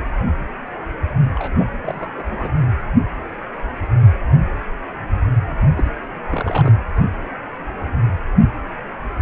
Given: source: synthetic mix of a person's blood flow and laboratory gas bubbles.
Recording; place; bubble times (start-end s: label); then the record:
Doppler ultrasound of blood flow; precordium
1.35-1.65 s: bubbles
1.84-2.10 s: bubbles
2.14-2.50 s: bubbles
5.61-5.65 s: bubbles
5.75-5.96 s: bubbles
6.29-6.72 s: bubbles
From the record:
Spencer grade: 2 (many but less than half of the cardiac periods contain bubble signals, singularly or in groups); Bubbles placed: anywhere in the cardiac cycle